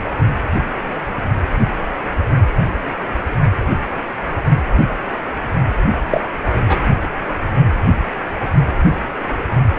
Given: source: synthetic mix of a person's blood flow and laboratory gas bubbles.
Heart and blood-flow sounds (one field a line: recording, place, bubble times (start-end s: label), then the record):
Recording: Doppler ultrasound of blood flow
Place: precordium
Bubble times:
6.08-6.21 s: bubbles
6.66-6.77 s: bubbles
From the record:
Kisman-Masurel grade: 113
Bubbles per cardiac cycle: 1 to 2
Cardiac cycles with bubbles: 1 to 10%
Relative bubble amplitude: loud (0.450 to 0.775)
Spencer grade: 1 (occasional bubble signal discernible with the cardiac motion signal, with majority of cardiac periods free of bubbles)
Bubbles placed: only in the low amplitude regions of the cardiac cycle